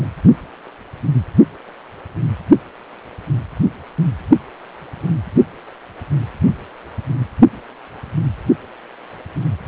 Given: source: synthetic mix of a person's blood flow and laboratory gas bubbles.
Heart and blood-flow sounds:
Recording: Doppler ultrasound of blood flow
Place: precordium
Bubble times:
0.00-0.07 s: bubbles
From the record:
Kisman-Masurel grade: 221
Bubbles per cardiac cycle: several, 3 to 8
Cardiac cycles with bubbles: 10 to 50%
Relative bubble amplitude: barely perceptible (0.100 to 0.250)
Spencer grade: 2 (many but less than half of the cardiac periods contain bubble signals, singularly or in groups)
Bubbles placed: anywhere in the cardiac cycle

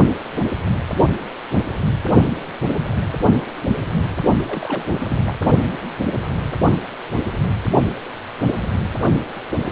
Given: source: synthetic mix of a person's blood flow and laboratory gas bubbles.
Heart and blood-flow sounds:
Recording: Doppler ultrasound of blood flow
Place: precordium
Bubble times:
4.46-5.19 s: bubbles
5.26-5.39 s: bubbles
From the record:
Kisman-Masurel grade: 221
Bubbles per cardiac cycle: several, 3 to 8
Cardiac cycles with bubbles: 10 to 50%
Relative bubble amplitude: barely perceptible (0.100 to 0.250)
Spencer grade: 2 (many but less than half of the cardiac periods contain bubble signals, singularly or in groups)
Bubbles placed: only in the low amplitude regions of the cardiac cycle

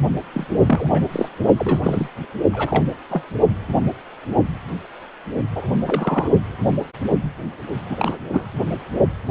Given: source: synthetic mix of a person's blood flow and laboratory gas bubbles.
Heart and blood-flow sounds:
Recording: Doppler ultrasound of blood flow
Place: precordium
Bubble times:
0.33-0.46 s: bubbles
0.66-1.02 s: bubbles
1.11-1.29 s: bubbles
1.58-2.08 s: bubbles
2.52-2.86 s: bubbles
3.10-3.23 s: bubbles
5.55-5.75 s: bubbles
5.85-6.28 s: bubbles
7.90-8.18 s: bubbles
8.31-8.46 s: bubbles
From the record:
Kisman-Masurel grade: 232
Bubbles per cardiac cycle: several, 3 to 8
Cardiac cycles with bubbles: 50 to 99%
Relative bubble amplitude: moderate (0.250 to 0.450)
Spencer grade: 3 (all of the cardiac periods contain showers or single bubble signals, but not dominating or overriding the cardiac motion signals)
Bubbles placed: only in the low amplitude regions of the cardiac cycle

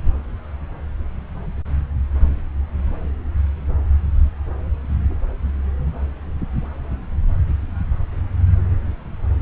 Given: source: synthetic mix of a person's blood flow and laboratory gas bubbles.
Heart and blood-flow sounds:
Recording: Doppler ultrasound of blood flow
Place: subclavian vein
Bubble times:
no bubbles
From the record:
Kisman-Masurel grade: 000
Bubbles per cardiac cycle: 0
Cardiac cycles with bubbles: 0%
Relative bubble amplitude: no bubbles discernible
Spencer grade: 0 (complete lack of bubble signals)

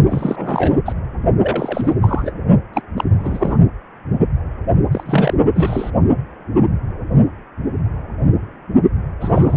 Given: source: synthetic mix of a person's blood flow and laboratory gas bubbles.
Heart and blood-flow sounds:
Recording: Doppler ultrasound of blood flow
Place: precordium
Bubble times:
0.09-0.79 s: bubbles
0.85-0.93 s: bubbles
1.41-1.95 s: bubbles
2.02-2.33 s: bubbles
2.73-2.81 s: bubbles
2.96-3.04 s: bubbles
3.19-3.57 s: bubbles
4.91-5.34 s: bubbles
5.54-5.90 s: bubbles
9.21-9.57 s: bubbles
From the record:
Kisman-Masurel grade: 332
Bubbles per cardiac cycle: rolling drumbeat, 9 or more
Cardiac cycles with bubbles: 50 to 99%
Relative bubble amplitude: moderate (0.250 to 0.450)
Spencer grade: 3 (all of the cardiac periods contain showers or single bubble signals, but not dominating or overriding the cardiac motion signals)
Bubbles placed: only in the low amplitude regions of the cardiac cycle

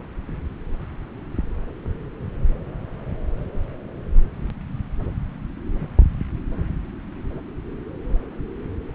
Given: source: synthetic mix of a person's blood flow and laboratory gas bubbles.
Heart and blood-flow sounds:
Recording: Doppler ultrasound of blood flow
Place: subclavian vein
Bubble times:
no bubbles
From the record:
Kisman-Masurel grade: 000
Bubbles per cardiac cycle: 0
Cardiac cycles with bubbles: 0%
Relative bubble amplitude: no bubbles discernible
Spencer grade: 0 (complete lack of bubble signals)

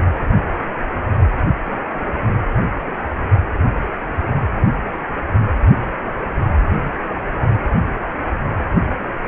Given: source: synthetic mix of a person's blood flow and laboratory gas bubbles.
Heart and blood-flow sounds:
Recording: Doppler ultrasound of blood flow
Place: precordium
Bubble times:
no bubbles
From the record:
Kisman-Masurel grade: 000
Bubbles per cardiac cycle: 0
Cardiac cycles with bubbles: 0%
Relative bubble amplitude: no bubbles discernible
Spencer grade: 0 (complete lack of bubble signals)

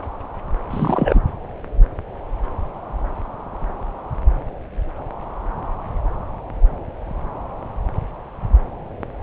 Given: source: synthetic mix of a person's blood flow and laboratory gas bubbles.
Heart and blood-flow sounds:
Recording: Doppler ultrasound of blood flow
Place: subclavian vein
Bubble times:
0.70-1.20 s: bubbles
From the record:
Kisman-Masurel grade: 213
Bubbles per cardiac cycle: several, 3 to 8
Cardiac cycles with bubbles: 1 to 10%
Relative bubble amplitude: loud (0.450 to 0.775)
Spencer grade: 1 (occasional bubble signal discernible with the cardiac motion signal, with majority of cardiac periods free of bubbles)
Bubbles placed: anywhere in the cardiac cycle

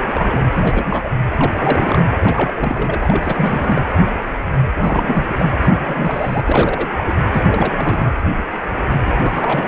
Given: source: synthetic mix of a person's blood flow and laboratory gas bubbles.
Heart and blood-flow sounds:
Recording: Doppler ultrasound of blood flow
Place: precordium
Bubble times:
0.00-0.48 s: bubbles
0.55-1.09 s: bubbles
1.31-2.01 s: bubbles
2.20-3.00 s: bubbles
3.02-3.80 s: bubbles
4.75-5.26 s: bubbles
5.38-5.46 s: bubbles
5.62-5.74 s: bubbles
5.83-6.40 s: bubbles
6.43-6.89 s: bubbles
6.97-7.17 s: bubbles
7.31-7.43 s: bubbles
7.46-8.13 s: bubbles
9.07-9.12 s: bubbles
9.20-9.68 s: bubbles
From the record:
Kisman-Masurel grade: 332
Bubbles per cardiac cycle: rolling drumbeat, 9 or more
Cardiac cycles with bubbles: 50 to 99%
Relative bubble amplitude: moderate (0.250 to 0.450)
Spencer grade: 3 (all of the cardiac periods contain showers or single bubble signals, but not dominating or overriding the cardiac motion signals)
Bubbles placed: anywhere in the cardiac cycle

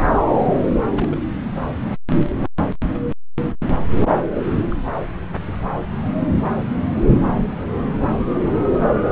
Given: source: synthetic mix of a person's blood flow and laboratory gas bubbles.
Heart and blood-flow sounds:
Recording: Doppler ultrasound of blood flow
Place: subclavian vein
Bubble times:
0.97-1.22 s: bubbles
4.33-4.42 s: bubbles
4.68-4.77 s: bubbles
From the record:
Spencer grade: 2 (many but less than half of the cardiac periods contain bubble signals, singularly or in groups)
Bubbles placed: anywhere in the cardiac cycle

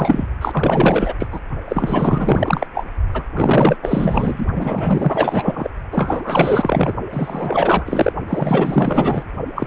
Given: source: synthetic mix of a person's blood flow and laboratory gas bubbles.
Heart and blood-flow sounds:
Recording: Doppler ultrasound of blood flow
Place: precordium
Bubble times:
0.00-0.27 s: bubbles
0.41-1.14 s: bubbles
1.19-1.40 s: bubbles
1.68-2.67 s: bubbles
2.74-2.87 s: bubbles
3.13-3.24 s: bubbles
3.37-3.77 s: bubbles
3.81-4.46 s: bubbles
4.55-5.70 s: bubbles
5.92-6.96 s: bubbles
7.12-8.12 s: bubbles
8.28-9.24 s: bubbles
9.55-9.67 s: bubbles
From the record:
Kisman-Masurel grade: 444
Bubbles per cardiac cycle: continuous sound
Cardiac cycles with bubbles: 100%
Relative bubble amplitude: maximal (0.775 to 0.999)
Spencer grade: 4 (maximum detectable bubble signal sounding continuously throughout systole and diastole of every cardiac period, and overriding the amplitude of the normal cardiac signals)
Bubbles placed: only in the low amplitude regions of the cardiac cycle

